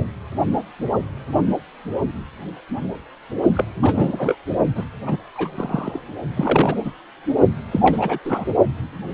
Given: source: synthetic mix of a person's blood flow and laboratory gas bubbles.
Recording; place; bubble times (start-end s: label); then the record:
Doppler ultrasound of blood flow; precordium
3.54-3.65 s: bubbles
3.83-4.38 s: bubbles
4.75-4.84 s: bubbles
5.06-5.17 s: bubbles
5.34-6.00 s: bubbles
6.36-6.92 s: bubbles
7.71-8.19 s: bubbles
8.24-8.45 s: bubbles
From the record:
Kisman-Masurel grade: 232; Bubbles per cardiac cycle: several, 3 to 8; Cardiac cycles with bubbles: 50 to 99%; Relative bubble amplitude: moderate (0.250 to 0.450); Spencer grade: 3 (all of the cardiac periods contain showers or single bubble signals, but not dominating or overriding the cardiac motion signals); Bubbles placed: only in the low amplitude regions of the cardiac cycle